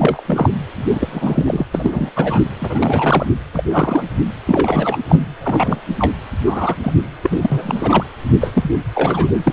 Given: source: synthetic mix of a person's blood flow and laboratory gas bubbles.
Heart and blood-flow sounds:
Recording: Doppler ultrasound of blood flow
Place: precordium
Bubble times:
0.00-0.23 s: bubbles
0.27-0.50 s: bubbles
0.76-1.66 s: bubbles
1.74-2.10 s: bubbles
2.16-2.41 s: bubbles
2.61-3.26 s: bubbles
3.53-3.63 s: bubbles
3.71-4.04 s: bubbles
4.46-4.97 s: bubbles
5.08-5.22 s: bubbles
5.41-5.80 s: bubbles
5.99-6.12 s: bubbles
6.46-6.76 s: bubbles
6.83-6.92 s: bubbles
7.22-8.04 s: bubbles
8.40-8.70 s: bubbles
8.94-9.31 s: bubbles
9.43-9.53 s: bubbles
From the record:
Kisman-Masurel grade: 243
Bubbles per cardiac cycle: several, 3 to 8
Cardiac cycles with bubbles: 100%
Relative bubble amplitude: loud (0.450 to 0.775)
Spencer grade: 3 (all of the cardiac periods contain showers or single bubble signals, but not dominating or overriding the cardiac motion signals)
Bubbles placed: anywhere in the cardiac cycle

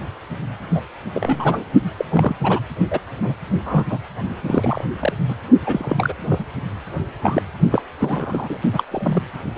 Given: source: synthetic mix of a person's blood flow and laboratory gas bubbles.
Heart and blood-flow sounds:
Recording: Doppler ultrasound of blood flow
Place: precordium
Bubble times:
0.73-0.81 s: bubbles
1.14-1.64 s: bubbles
1.97-2.05 s: bubbles
2.10-2.35 s: bubbles
2.44-2.61 s: bubbles
2.90-3.00 s: bubbles
3.18-3.35 s: bubbles
3.65-3.85 s: bubbles
3.90-3.99 s: bubbles
4.46-4.84 s: bubbles
5.00-5.13 s: bubbles
5.29-5.35 s: bubbles
5.66-6.13 s: bubbles
6.29-6.46 s: bubbles
7.21-7.42 s: bubbles
7.71-7.82 s: bubbles
7.99-8.57 s: bubbles
8.73-8.83 s: bubbles
8.90-9.22 s: bubbles
9.55-9.58 s: bubbles
From the record:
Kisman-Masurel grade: 242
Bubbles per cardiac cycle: several, 3 to 8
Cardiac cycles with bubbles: 100%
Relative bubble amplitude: moderate (0.250 to 0.450)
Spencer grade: 3 (all of the cardiac periods contain showers or single bubble signals, but not dominating or overriding the cardiac motion signals)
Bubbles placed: only in the low amplitude regions of the cardiac cycle

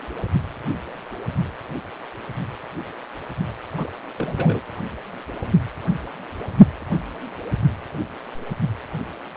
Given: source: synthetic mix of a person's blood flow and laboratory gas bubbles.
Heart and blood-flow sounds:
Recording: Doppler ultrasound of blood flow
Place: precordium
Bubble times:
3.78-3.91 s: bubbles
4.18-4.60 s: bubbles
From the record:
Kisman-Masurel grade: 221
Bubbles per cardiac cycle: several, 3 to 8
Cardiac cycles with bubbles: 10 to 50%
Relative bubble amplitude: barely perceptible (0.100 to 0.250)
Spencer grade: 2 (many but less than half of the cardiac periods contain bubble signals, singularly or in groups)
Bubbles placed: anywhere in the cardiac cycle

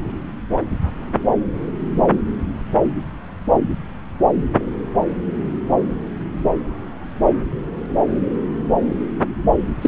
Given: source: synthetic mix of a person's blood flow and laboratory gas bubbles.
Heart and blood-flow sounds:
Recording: Doppler ultrasound of blood flow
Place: subclavian vein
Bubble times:
9.82-9.88 s: bubbles
From the record:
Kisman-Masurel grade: 113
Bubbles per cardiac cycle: 1 to 2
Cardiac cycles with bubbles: 1 to 10%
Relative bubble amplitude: loud (0.450 to 0.775)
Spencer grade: 1 (occasional bubble signal discernible with the cardiac motion signal, with majority of cardiac periods free of bubbles)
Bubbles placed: anywhere in the cardiac cycle

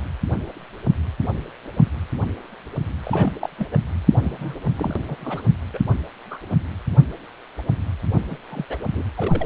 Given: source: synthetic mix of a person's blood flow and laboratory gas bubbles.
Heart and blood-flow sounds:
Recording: Doppler ultrasound of blood flow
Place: precordium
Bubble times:
3.03-3.33 s: bubbles
3.41-3.50 s: bubbles
3.58-3.68 s: bubbles
3.71-3.78 s: bubbles
4.22-4.58 s: bubbles
4.76-5.00 s: bubbles
5.08-5.16 s: bubbles
5.21-5.45 s: bubbles
5.73-5.79 s: bubbles
6.31-6.38 s: bubbles
6.49-6.56 s: bubbles
8.29-8.37 s: bubbles
8.50-8.65 s: bubbles
8.69-8.77 s: bubbles
8.95-9.03 s: bubbles
9.17-9.46 s: bubbles
From the record:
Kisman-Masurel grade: 221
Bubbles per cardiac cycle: several, 3 to 8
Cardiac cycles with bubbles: 10 to 50%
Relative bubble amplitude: barely perceptible (0.100 to 0.250)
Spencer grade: 2 (many but less than half of the cardiac periods contain bubble signals, singularly or in groups)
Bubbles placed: only in the low amplitude regions of the cardiac cycle

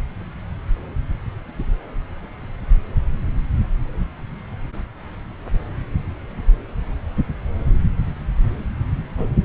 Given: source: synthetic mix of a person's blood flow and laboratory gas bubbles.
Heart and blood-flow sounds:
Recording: Doppler ultrasound of blood flow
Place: subclavian vein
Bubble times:
9.17-9.29 s: bubbles
From the record:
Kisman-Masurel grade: 113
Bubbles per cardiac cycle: 1 to 2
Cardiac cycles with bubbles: 1 to 10%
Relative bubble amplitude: loud (0.450 to 0.775)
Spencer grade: 1 (occasional bubble signal discernible with the cardiac motion signal, with majority of cardiac periods free of bubbles)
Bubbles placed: anywhere in the cardiac cycle

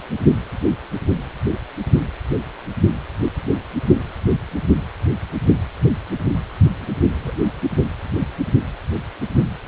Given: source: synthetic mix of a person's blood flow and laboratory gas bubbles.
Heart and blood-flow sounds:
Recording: Doppler ultrasound of blood flow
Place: precordium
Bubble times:
6.71-7.00 s: bubbles
7.14-7.49 s: bubbles
From the record:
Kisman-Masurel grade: 111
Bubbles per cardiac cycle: 1 to 2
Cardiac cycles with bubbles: 1 to 10%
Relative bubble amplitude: barely perceptible (0.100 to 0.250)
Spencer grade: 1 (occasional bubble signal discernible with the cardiac motion signal, with majority of cardiac periods free of bubbles)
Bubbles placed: only in the low amplitude regions of the cardiac cycle

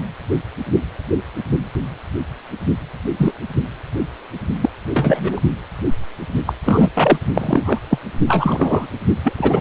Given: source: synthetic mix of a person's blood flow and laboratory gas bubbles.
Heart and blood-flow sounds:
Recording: Doppler ultrasound of blood flow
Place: precordium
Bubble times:
3.17-3.33 s: bubbles
4.61-4.69 s: bubbles
4.88-5.40 s: bubbles
6.46-6.53 s: bubbles
6.66-6.91 s: bubbles
6.95-7.18 s: bubbles
7.34-7.81 s: bubbles
7.90-7.99 s: bubbles
8.27-8.88 s: bubbles
9.23-9.33 s: bubbles
9.38-9.61 s: bubbles
From the record:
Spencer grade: 3 (all of the cardiac periods contain showers or single bubble signals, but not dominating or overriding the cardiac motion signals)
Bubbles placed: only in the low amplitude regions of the cardiac cycle

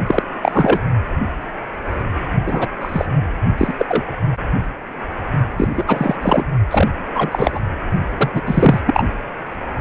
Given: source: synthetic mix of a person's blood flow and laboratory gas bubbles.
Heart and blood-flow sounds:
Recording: Doppler ultrasound of blood flow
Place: precordium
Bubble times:
0.07-0.22 s: bubbles
0.41-0.80 s: bubbles
2.46-2.67 s: bubbles
2.81-3.08 s: bubbles
3.57-3.73 s: bubbles
3.79-3.85 s: bubbles
3.88-4.05 s: bubbles
5.58-5.68 s: bubbles
5.76-5.85 s: bubbles
5.87-6.16 s: bubbles
6.22-6.47 s: bubbles
6.71-6.88 s: bubbles
7.15-7.62 s: bubbles
8.17-8.41 s: bubbles
8.46-8.80 s: bubbles
8.86-9.06 s: bubbles
From the record:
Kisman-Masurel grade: 333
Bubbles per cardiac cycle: rolling drumbeat, 9 or more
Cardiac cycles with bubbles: 50 to 99%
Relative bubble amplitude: loud (0.450 to 0.775)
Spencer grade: 3 (all of the cardiac periods contain showers or single bubble signals, but not dominating or overriding the cardiac motion signals)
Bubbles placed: only in the low amplitude regions of the cardiac cycle

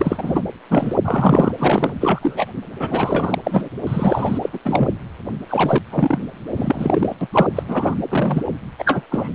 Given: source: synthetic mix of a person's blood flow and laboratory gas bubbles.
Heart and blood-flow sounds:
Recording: Doppler ultrasound of blood flow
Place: precordium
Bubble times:
0.00-0.43 s: bubbles
0.70-0.95 s: bubbles
1.04-1.52 s: bubbles
1.58-1.94 s: bubbles
2.01-2.46 s: bubbles
2.79-3.35 s: bubbles
3.43-3.69 s: bubbles
3.86-4.38 s: bubbles
4.42-4.50 s: bubbles
4.52-4.58 s: bubbles
4.65-4.89 s: bubbles
5.49-5.78 s: bubbles
5.92-6.19 s: bubbles
6.56-7.15 s: bubbles
7.21-7.27 s: bubbles
7.32-7.47 s: bubbles
7.54-7.94 s: bubbles
8.09-8.42 s: bubbles
8.78-9.02 s: bubbles
9.11-9.29 s: bubbles
From the record:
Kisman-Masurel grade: 243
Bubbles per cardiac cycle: several, 3 to 8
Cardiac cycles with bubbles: 100%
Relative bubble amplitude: loud (0.450 to 0.775)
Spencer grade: 3 (all of the cardiac periods contain showers or single bubble signals, but not dominating or overriding the cardiac motion signals)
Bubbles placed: anywhere in the cardiac cycle

